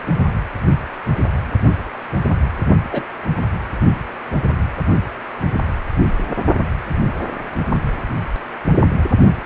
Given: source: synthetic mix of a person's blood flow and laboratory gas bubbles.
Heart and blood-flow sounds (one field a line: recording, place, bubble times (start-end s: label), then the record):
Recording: Doppler ultrasound of blood flow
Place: precordium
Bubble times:
2.92-3.04 s: bubbles
From the record:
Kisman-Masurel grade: 112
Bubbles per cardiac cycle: 1 to 2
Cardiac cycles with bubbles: 1 to 10%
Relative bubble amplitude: moderate (0.250 to 0.450)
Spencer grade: 1 (occasional bubble signal discernible with the cardiac motion signal, with majority of cardiac periods free of bubbles)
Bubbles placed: only in the low amplitude regions of the cardiac cycle